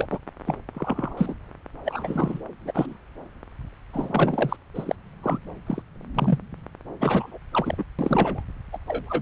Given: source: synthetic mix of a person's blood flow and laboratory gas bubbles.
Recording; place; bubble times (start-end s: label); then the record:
Doppler ultrasound of blood flow; subclavian vein
0.00-0.07 s: bubbles
0.11-0.18 s: bubbles
0.46-0.56 s: bubbles
0.75-1.14 s: bubbles
1.17-1.34 s: bubbles
1.85-2.41 s: bubbles
2.65-2.71 s: bubbles
2.74-2.97 s: bubbles
3.93-4.57 s: bubbles
4.74-4.95 s: bubbles
5.23-5.38 s: bubbles
5.66-5.82 s: bubbles
6.15-6.39 s: bubbles
6.99-7.38 s: bubbles
7.54-7.84 s: bubbles
7.98-8.42 s: bubbles
8.72-8.78 s: bubbles
8.88-9.22 s: bubbles
From the record:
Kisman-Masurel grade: 242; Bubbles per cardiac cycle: several, 3 to 8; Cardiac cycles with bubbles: 100%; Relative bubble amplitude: moderate (0.250 to 0.450); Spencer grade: 3 (all of the cardiac periods contain showers or single bubble signals, but not dominating or overriding the cardiac motion signals); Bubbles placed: anywhere in the cardiac cycle